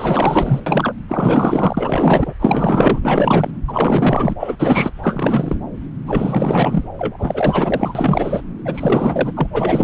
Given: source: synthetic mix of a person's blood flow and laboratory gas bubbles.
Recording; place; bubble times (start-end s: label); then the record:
Doppler ultrasound of blood flow; subclavian vein
0.00-0.60 s: bubbles
0.66-0.93 s: bubbles
1.08-2.34 s: bubbles
2.40-3.50 s: bubbles
3.67-4.34 s: bubbles
4.39-4.91 s: bubbles
5.03-5.58 s: bubbles
6.06-6.84 s: bubbles
6.99-8.42 s: bubbles
8.65-9.32 s: bubbles
9.36-9.48 s: bubbles
9.52-9.83 s: bubbles
From the record:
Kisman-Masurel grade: 444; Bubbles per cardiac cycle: continuous sound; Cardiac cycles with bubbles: 100%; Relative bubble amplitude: maximal (0.775 to 0.999); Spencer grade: 4 (maximum detectable bubble signal sounding continuously throughout systole and diastole of every cardiac period, and overriding the amplitude of the normal cardiac signals); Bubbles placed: anywhere in the cardiac cycle